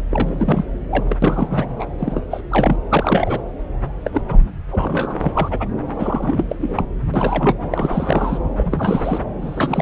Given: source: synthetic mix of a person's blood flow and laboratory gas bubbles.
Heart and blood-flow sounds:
Doppler ultrasound of blood flow; subclavian vein
0.11-0.65 s: bubbles
0.90-1.17 s: bubbles
1.22-1.75 s: bubbles
1.79-1.88 s: bubbles
1.99-2.21 s: bubbles
2.30-2.42 s: bubbles
2.50-2.77 s: bubbles
2.90-3.40 s: bubbles
4.04-4.22 s: bubbles
4.28-4.38 s: bubbles
4.69-5.69 s: bubbles
5.97-6.43 s: bubbles
6.49-6.56 s: bubbles
6.60-6.85 s: bubbles
7.13-7.58 s: bubbles
7.71-8.39 s: bubbles
8.57-9.21 s: bubbles
9.41-9.82 s: bubbles
From the record:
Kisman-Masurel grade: 342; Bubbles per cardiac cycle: rolling drumbeat, 9 or more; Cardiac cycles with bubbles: 100%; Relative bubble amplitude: moderate (0.250 to 0.450); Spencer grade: 3 (all of the cardiac periods contain showers or single bubble signals, but not dominating or overriding the cardiac motion signals); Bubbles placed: anywhere in the cardiac cycle

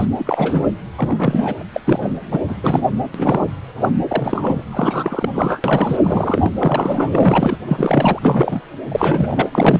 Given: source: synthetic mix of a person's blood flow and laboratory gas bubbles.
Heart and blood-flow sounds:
Doppler ultrasound of blood flow; precordium
0.00-0.06 s: bubbles
0.18-0.67 s: bubbles
0.96-1.55 s: bubbles
1.59-1.62 s: bubbles
1.74-1.80 s: bubbles
1.85-2.10 s: bubbles
2.31-2.40 s: bubbles
2.48-2.82 s: bubbles
3.14-3.40 s: bubbles
3.77-3.90 s: bubbles
4.08-4.63 s: bubbles
4.71-5.29 s: bubbles
5.34-5.62 s: bubbles
5.64-5.97 s: bubbles
6.03-6.51 s: bubbles
6.58-7.09 s: bubbles
7.12-7.57 s: bubbles
7.67-8.61 s: bubbles
8.88-9.49 s: bubbles
9.52-9.80 s: bubbles
From the record:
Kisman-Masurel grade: 342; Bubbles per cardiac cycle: rolling drumbeat, 9 or more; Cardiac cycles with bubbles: 100%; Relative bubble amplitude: moderate (0.250 to 0.450); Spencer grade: 3 (all of the cardiac periods contain showers or single bubble signals, but not dominating or overriding the cardiac motion signals); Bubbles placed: anywhere in the cardiac cycle

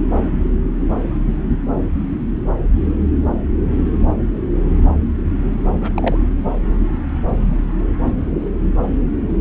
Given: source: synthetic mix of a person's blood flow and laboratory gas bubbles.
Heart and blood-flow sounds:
Doppler ultrasound of blood flow; subclavian vein
5.81-6.17 s: bubbles
From the record:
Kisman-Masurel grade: 112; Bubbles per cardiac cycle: 1 to 2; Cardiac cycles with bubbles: 1 to 10%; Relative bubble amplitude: moderate (0.250 to 0.450); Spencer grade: 1 (occasional bubble signal discernible with the cardiac motion signal, with majority of cardiac periods free of bubbles); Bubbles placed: anywhere in the cardiac cycle

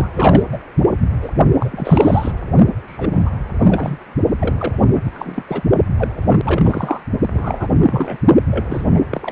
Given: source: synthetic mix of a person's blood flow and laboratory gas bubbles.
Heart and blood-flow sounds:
Doppler ultrasound of blood flow; precordium
0.00-0.09 s: bubbles
0.13-0.44 s: bubbles
0.52-0.58 s: bubbles
1.22-1.31 s: bubbles
1.60-2.32 s: bubbles
2.85-3.30 s: bubbles
3.59-3.98 s: bubbles
4.37-4.83 s: bubbles
4.91-5.43 s: bubbles
5.47-5.63 s: bubbles
5.98-6.12 s: bubbles
6.16-7.00 s: bubbles
7.22-7.69 s: bubbles
7.79-8.19 s: bubbles
8.50-9.02 s: bubbles
9.11-9.32 s: bubbles
From the record:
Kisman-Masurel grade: 343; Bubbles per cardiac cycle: rolling drumbeat, 9 or more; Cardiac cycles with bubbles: 100%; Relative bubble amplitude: loud (0.450 to 0.775); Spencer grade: 3 (all of the cardiac periods contain showers or single bubble signals, but not dominating or overriding the cardiac motion signals); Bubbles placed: only in the low amplitude regions of the cardiac cycle

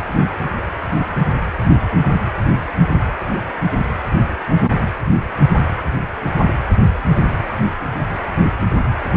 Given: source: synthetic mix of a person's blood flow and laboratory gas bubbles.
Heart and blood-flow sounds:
Doppler ultrasound of blood flow; precordium
no bubbles
From the record:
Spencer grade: 0 (complete lack of bubble signals)

